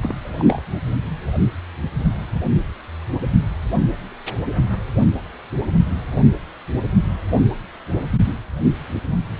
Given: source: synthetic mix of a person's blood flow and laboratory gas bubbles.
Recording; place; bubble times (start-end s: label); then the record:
Doppler ultrasound of blood flow; precordium
0.02-0.15 s: bubbles
0.24-0.62 s: bubbles
From the record:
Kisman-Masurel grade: 211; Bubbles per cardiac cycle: several, 3 to 8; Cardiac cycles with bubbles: 1 to 10%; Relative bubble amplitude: barely perceptible (0.100 to 0.250); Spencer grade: 1 (occasional bubble signal discernible with the cardiac motion signal, with majority of cardiac periods free of bubbles); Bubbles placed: only in the low amplitude regions of the cardiac cycle